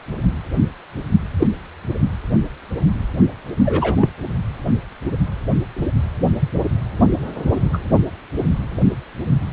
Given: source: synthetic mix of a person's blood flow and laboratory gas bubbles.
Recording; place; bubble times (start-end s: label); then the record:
Doppler ultrasound of blood flow; precordium
1.39-1.47 s: bubbles
3.65-4.09 s: bubbles
7.73-7.79 s: bubbles
From the record:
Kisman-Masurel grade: 123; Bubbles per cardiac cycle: 1 to 2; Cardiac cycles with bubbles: 10 to 50%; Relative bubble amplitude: loud (0.450 to 0.775); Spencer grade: 2 (many but less than half of the cardiac periods contain bubble signals, singularly or in groups); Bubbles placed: only in the low amplitude regions of the cardiac cycle